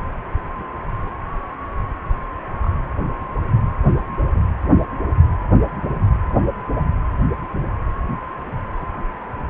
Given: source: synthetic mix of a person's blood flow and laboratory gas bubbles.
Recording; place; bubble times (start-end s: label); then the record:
Doppler ultrasound of blood flow; precordium
2.62-2.70 s: bubbles
From the record:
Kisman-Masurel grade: 111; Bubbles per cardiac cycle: 1 to 2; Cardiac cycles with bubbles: 1 to 10%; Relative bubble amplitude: barely perceptible (0.100 to 0.250); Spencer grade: 1 (occasional bubble signal discernible with the cardiac motion signal, with majority of cardiac periods free of bubbles); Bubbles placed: anywhere in the cardiac cycle